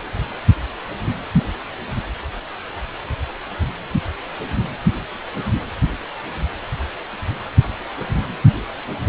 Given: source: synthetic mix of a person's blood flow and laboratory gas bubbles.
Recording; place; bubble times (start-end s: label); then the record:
Doppler ultrasound of blood flow; precordium
no bubbles
From the record:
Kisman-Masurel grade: 000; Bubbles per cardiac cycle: 0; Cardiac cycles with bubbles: 0%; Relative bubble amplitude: no bubbles discernible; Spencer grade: 0 (complete lack of bubble signals)